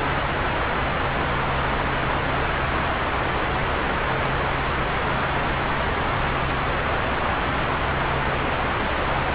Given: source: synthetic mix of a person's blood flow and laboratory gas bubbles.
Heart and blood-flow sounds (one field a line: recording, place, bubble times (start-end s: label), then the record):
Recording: Doppler ultrasound of blood flow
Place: subclavian vein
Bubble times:
no bubbles
From the record:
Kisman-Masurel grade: 000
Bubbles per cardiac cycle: 0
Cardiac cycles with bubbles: 0%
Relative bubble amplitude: no bubbles discernible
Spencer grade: 0 (complete lack of bubble signals)